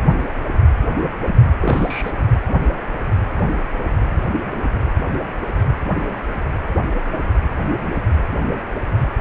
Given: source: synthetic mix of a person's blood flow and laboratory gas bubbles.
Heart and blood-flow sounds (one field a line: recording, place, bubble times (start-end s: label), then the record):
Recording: Doppler ultrasound of blood flow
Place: precordium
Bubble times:
1.62-2.11 s: bubbles
From the record:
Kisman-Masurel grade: 211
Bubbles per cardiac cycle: several, 3 to 8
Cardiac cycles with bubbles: 1 to 10%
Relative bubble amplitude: barely perceptible (0.100 to 0.250)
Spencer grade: 1 (occasional bubble signal discernible with the cardiac motion signal, with majority of cardiac periods free of bubbles)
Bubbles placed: anywhere in the cardiac cycle